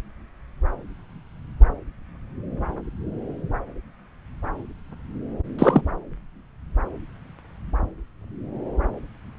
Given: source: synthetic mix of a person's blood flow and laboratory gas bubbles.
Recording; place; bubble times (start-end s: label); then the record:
Doppler ultrasound of blood flow; subclavian vein
5.58-5.82 s: bubbles
From the record:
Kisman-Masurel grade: 113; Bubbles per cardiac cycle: 1 to 2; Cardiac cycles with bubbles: 1 to 10%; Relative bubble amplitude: loud (0.450 to 0.775); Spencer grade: 1 (occasional bubble signal discernible with the cardiac motion signal, with majority of cardiac periods free of bubbles); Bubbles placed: anywhere in the cardiac cycle